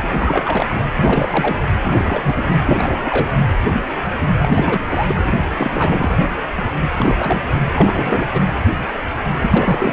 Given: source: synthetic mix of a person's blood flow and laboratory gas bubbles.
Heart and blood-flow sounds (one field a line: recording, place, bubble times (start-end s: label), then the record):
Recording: Doppler ultrasound of blood flow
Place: precordium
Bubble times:
0.02-0.08 s: bubbles
0.17-0.77 s: bubbles
0.96-1.63 s: bubbles
1.80-2.62 s: bubbles
2.65-3.31 s: bubbles
4.38-5.21 s: bubbles
5.24-5.49 s: bubbles
5.56-6.09 s: bubbles
6.98-7.16 s: bubbles
7.19-7.42 s: bubbles
7.76-8.41 s: bubbles
9.35-9.92 s: bubbles
From the record:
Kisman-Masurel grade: 332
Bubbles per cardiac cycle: rolling drumbeat, 9 or more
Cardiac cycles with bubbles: 50 to 99%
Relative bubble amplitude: moderate (0.250 to 0.450)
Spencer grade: 3 (all of the cardiac periods contain showers or single bubble signals, but not dominating or overriding the cardiac motion signals)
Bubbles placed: anywhere in the cardiac cycle